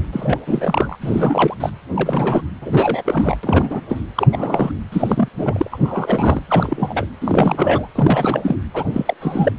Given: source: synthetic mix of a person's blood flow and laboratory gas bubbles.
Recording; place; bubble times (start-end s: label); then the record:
Doppler ultrasound of blood flow; precordium
0.12-0.97 s: bubbles
1.01-1.54 s: bubbles
1.60-1.70 s: bubbles
1.94-2.42 s: bubbles
2.62-3.37 s: bubbles
3.43-3.80 s: bubbles
3.88-4.00 s: bubbles
4.15-4.28 s: bubbles
4.32-4.71 s: bubbles
4.92-5.29 s: bubbles
5.36-6.42 s: bubbles
6.47-7.07 s: bubbles
7.21-7.89 s: bubbles
7.94-8.56 s: bubbles
8.73-8.84 s: bubbles
8.93-9.14 s: bubbles
9.20-9.52 s: bubbles
From the record:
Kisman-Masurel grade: 342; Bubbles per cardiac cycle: rolling drumbeat, 9 or more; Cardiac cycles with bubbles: 100%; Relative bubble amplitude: moderate (0.250 to 0.450); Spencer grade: 3 (all of the cardiac periods contain showers or single bubble signals, but not dominating or overriding the cardiac motion signals); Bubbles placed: anywhere in the cardiac cycle